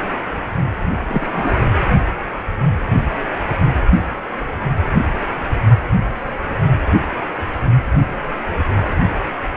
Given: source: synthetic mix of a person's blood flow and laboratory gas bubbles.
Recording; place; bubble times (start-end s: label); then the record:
Doppler ultrasound of blood flow; precordium
1.08-1.57 s: bubbles
From the record:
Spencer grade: 1 (occasional bubble signal discernible with the cardiac motion signal, with majority of cardiac periods free of bubbles); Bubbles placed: anywhere in the cardiac cycle